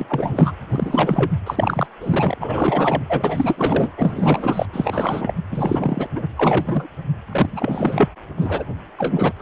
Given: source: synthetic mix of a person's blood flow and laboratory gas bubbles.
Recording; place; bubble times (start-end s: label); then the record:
Doppler ultrasound of blood flow; precordium
0.00-0.52 s: bubbles
0.71-1.31 s: bubbles
1.46-1.86 s: bubbles
2.00-2.35 s: bubbles
2.40-3.03 s: bubbles
3.09-3.91 s: bubbles
3.96-4.66 s: bubbles
4.73-5.34 s: bubbles
5.51-6.07 s: bubbles
6.15-6.26 s: bubbles
6.36-6.87 s: bubbles
7.29-8.08 s: bubbles
8.37-8.64 s: bubbles
8.97-9.32 s: bubbles
9.37-9.42 s: bubbles
From the record:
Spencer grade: 3 (all of the cardiac periods contain showers or single bubble signals, but not dominating or overriding the cardiac motion signals); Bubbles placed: anywhere in the cardiac cycle